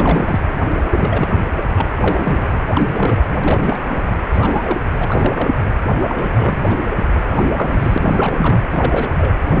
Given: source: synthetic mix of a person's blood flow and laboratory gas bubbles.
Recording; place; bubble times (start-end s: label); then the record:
Doppler ultrasound of blood flow; precordium
0.00-0.40 s: bubbles
0.91-1.29 s: bubbles
1.56-1.69 s: bubbles
1.77-1.87 s: bubbles
2.00-2.59 s: bubbles
2.69-3.19 s: bubbles
3.41-3.80 s: bubbles
3.90-4.01 s: bubbles
4.07-4.16 s: bubbles
4.31-4.80 s: bubbles
5.00-5.06 s: bubbles
5.08-5.54 s: bubbles
6.00-6.90 s: bubbles
7.29-7.47 s: bubbles
7.55-7.98 s: bubbles
8.00-8.60 s: bubbles
8.70-9.10 s: bubbles
9.18-9.35 s: bubbles
9.46-9.60 s: bubbles
From the record:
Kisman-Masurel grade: 332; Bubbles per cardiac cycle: rolling drumbeat, 9 or more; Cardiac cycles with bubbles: 50 to 99%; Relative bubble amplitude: moderate (0.250 to 0.450); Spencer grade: 3 (all of the cardiac periods contain showers or single bubble signals, but not dominating or overriding the cardiac motion signals); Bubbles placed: anywhere in the cardiac cycle